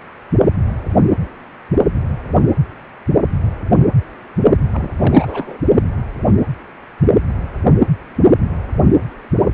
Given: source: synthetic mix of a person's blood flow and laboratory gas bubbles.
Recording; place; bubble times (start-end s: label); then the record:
Doppler ultrasound of blood flow; precordium
4.73-4.90 s: bubbles
4.99-5.58 s: bubbles
From the record:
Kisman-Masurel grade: 222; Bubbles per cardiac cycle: several, 3 to 8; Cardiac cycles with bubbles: 10 to 50%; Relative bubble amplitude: moderate (0.250 to 0.450); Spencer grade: 2 (many but less than half of the cardiac periods contain bubble signals, singularly or in groups); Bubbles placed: only in the low amplitude regions of the cardiac cycle